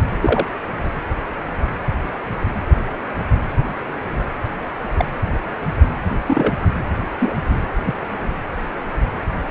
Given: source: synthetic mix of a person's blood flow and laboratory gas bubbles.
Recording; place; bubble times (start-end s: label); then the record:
Doppler ultrasound of blood flow; precordium
0.21-0.45 s: bubbles
4.97-5.05 s: bubbles
6.27-6.53 s: bubbles
7.18-7.35 s: bubbles
7.84-7.95 s: bubbles
From the record:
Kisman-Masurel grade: 122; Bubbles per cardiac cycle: 1 to 2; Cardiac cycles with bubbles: 10 to 50%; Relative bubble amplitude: moderate (0.250 to 0.450); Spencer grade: 2 (many but less than half of the cardiac periods contain bubble signals, singularly or in groups); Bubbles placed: anywhere in the cardiac cycle